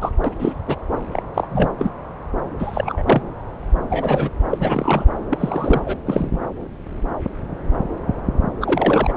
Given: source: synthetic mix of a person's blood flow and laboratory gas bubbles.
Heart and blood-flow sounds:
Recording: Doppler ultrasound of blood flow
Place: subclavian vein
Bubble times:
0.01-0.10 s: bubbles
0.24-0.30 s: bubbles
0.40-0.53 s: bubbles
0.67-0.76 s: bubbles
1.12-1.23 s: bubbles
1.34-1.47 s: bubbles
1.51-1.70 s: bubbles
1.78-1.90 s: bubbles
2.58-3.02 s: bubbles
3.05-3.21 s: bubbles
3.89-4.30 s: bubbles
4.50-5.05 s: bubbles
5.30-5.81 s: bubbles
5.85-5.97 s: bubbles
6.06-6.39 s: bubbles
8.61-9.12 s: bubbles
From the record:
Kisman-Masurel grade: 232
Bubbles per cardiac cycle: several, 3 to 8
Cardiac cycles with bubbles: 50 to 99%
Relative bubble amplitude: moderate (0.250 to 0.450)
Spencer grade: 3 (all of the cardiac periods contain showers or single bubble signals, but not dominating or overriding the cardiac motion signals)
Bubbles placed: anywhere in the cardiac cycle

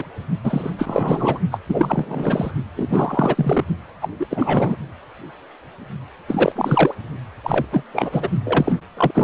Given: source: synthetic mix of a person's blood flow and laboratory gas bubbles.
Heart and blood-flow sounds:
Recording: Doppler ultrasound of blood flow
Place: precordium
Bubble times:
0.00-0.03 s: bubbles
0.43-0.70 s: bubbles
0.78-1.39 s: bubbles
1.51-1.59 s: bubbles
1.69-2.51 s: bubbles
2.76-3.64 s: bubbles
4.02-4.08 s: bubbles
4.20-4.27 s: bubbles
4.30-4.76 s: bubbles
6.28-6.52 s: bubbles
6.55-6.93 s: bubbles
7.43-7.66 s: bubbles
7.72-7.83 s: bubbles
7.93-8.28 s: bubbles
8.44-8.76 s: bubbles
8.96-9.11 s: bubbles
9.14-9.24 s: bubbles
From the record:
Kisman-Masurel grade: 333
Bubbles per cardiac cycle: rolling drumbeat, 9 or more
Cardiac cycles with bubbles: 50 to 99%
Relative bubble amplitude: loud (0.450 to 0.775)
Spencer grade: 3 (all of the cardiac periods contain showers or single bubble signals, but not dominating or overriding the cardiac motion signals)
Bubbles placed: only in the low amplitude regions of the cardiac cycle

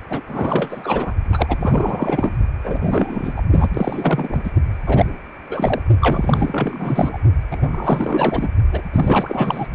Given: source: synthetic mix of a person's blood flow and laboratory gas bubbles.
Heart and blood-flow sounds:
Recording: Doppler ultrasound of blood flow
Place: precordium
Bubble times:
0.10-0.21 s: bubbles
0.28-1.13 s: bubbles
1.31-2.33 s: bubbles
2.63-3.34 s: bubbles
3.36-3.42 s: bubbles
3.50-3.69 s: bubbles
3.73-4.51 s: bubbles
4.86-5.06 s: bubbles
5.50-5.82 s: bubbles
6.00-7.18 s: bubbles
7.51-7.69 s: bubbles
7.72-8.49 s: bubbles
8.71-8.81 s: bubbles
8.92-9.67 s: bubbles
From the record:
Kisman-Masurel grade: 444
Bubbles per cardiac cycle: continuous sound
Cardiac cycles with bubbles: 100%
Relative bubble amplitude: maximal (0.775 to 0.999)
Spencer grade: 4 (maximum detectable bubble signal sounding continuously throughout systole and diastole of every cardiac period, and overriding the amplitude of the normal cardiac signals)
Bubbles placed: only in the low amplitude regions of the cardiac cycle

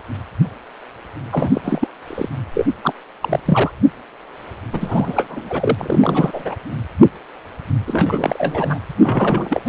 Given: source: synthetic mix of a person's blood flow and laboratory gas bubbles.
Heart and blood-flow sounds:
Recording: Doppler ultrasound of blood flow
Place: precordium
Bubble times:
1.31-1.88 s: bubbles
2.07-2.29 s: bubbles
2.54-2.65 s: bubbles
2.81-2.93 s: bubbles
3.22-3.40 s: bubbles
3.45-3.71 s: bubbles
4.73-5.75 s: bubbles
5.78-6.56 s: bubbles
7.86-8.79 s: bubbles
9.01-9.69 s: bubbles
From the record:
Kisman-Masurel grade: 332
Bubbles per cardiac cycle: rolling drumbeat, 9 or more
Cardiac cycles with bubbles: 50 to 99%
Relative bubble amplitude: moderate (0.250 to 0.450)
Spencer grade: 3 (all of the cardiac periods contain showers or single bubble signals, but not dominating or overriding the cardiac motion signals)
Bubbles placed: anywhere in the cardiac cycle

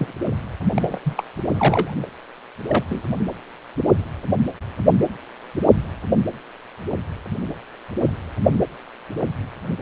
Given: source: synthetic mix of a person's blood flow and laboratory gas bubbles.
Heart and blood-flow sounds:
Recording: Doppler ultrasound of blood flow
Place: precordium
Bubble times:
0.00-0.14 s: bubbles
0.76-1.00 s: bubbles
1.04-1.23 s: bubbles
1.55-1.94 s: bubbles
2.02-2.07 s: bubbles
2.67-2.83 s: bubbles
2.90-3.02 s: bubbles
From the record:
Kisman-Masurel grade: 222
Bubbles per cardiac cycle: several, 3 to 8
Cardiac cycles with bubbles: 10 to 50%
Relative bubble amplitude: moderate (0.250 to 0.450)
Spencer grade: 2 (many but less than half of the cardiac periods contain bubble signals, singularly or in groups)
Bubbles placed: anywhere in the cardiac cycle

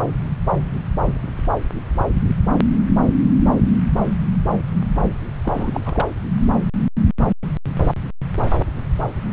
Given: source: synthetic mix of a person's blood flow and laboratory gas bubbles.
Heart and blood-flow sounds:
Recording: Doppler ultrasound of blood flow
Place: subclavian vein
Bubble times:
5.44-6.06 s: bubbles
From the record:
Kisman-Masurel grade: 211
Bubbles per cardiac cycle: several, 3 to 8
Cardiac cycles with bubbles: 1 to 10%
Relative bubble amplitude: barely perceptible (0.100 to 0.250)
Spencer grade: 1 (occasional bubble signal discernible with the cardiac motion signal, with majority of cardiac periods free of bubbles)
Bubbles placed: anywhere in the cardiac cycle

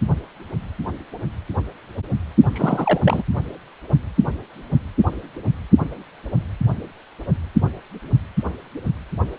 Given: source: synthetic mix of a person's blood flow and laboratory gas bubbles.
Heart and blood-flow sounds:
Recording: Doppler ultrasound of blood flow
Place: precordium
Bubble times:
2.53-3.00 s: bubbles
3.04-3.23 s: bubbles
From the record:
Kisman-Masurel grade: 212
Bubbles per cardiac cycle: several, 3 to 8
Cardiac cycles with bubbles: 1 to 10%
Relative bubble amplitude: moderate (0.250 to 0.450)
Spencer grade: 1 (occasional bubble signal discernible with the cardiac motion signal, with majority of cardiac periods free of bubbles)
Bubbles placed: only in the low amplitude regions of the cardiac cycle

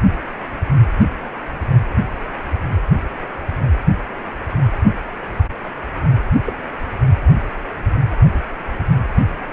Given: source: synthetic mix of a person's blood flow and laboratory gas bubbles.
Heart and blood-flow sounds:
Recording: Doppler ultrasound of blood flow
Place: precordium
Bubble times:
6.46-6.53 s: bubbles
From the record:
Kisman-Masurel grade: 112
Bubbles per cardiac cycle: 1 to 2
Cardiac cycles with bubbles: 1 to 10%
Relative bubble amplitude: moderate (0.250 to 0.450)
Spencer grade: 1 (occasional bubble signal discernible with the cardiac motion signal, with majority of cardiac periods free of bubbles)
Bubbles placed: only in the low amplitude regions of the cardiac cycle

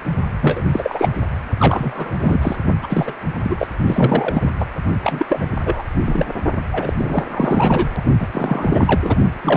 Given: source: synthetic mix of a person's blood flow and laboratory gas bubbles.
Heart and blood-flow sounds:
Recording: Doppler ultrasound of blood flow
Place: precordium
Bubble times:
0.41-0.62 s: bubbles
0.72-1.09 s: bubbles
1.58-2.14 s: bubbles
2.19-2.56 s: bubbles
2.82-3.14 s: bubbles
3.43-3.67 s: bubbles
3.87-4.56 s: bubbles
4.59-4.65 s: bubbles
5.03-5.26 s: bubbles
5.29-5.46 s: bubbles
5.58-5.83 s: bubbles
6.05-6.26 s: bubbles
6.71-6.93 s: bubbles
6.97-7.25 s: bubbles
7.31-8.01 s: bubbles
8.19-8.28 s: bubbles
8.32-9.15 s: bubbles
9.42-9.56 s: bubbles
From the record:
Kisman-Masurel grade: 343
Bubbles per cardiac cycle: rolling drumbeat, 9 or more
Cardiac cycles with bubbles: 100%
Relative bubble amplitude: loud (0.450 to 0.775)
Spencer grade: 3 (all of the cardiac periods contain showers or single bubble signals, but not dominating or overriding the cardiac motion signals)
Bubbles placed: only in the low amplitude regions of the cardiac cycle

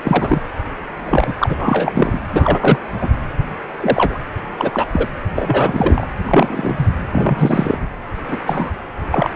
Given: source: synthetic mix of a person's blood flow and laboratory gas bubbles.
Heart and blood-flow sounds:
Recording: Doppler ultrasound of blood flow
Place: precordium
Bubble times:
0.05-0.42 s: bubbles
1.06-1.34 s: bubbles
1.39-2.19 s: bubbles
2.32-2.79 s: bubbles
3.00-3.09 s: bubbles
3.80-4.17 s: bubbles
4.58-4.88 s: bubbles
4.92-5.08 s: bubbles
5.35-6.07 s: bubbles
6.25-6.87 s: bubbles
7.12-7.79 s: bubbles
8.28-8.37 s: bubbles
8.46-8.70 s: bubbles
9.11-9.30 s: bubbles
From the record:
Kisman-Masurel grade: 243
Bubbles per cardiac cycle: several, 3 to 8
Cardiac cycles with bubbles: 100%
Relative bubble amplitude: loud (0.450 to 0.775)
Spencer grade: 3 (all of the cardiac periods contain showers or single bubble signals, but not dominating or overriding the cardiac motion signals)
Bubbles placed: anywhere in the cardiac cycle

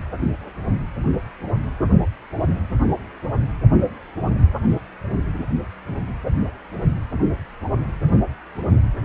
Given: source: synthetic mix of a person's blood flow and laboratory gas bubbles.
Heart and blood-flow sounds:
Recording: Doppler ultrasound of blood flow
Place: precordium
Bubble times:
no bubbles
From the record:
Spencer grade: 0 (complete lack of bubble signals)

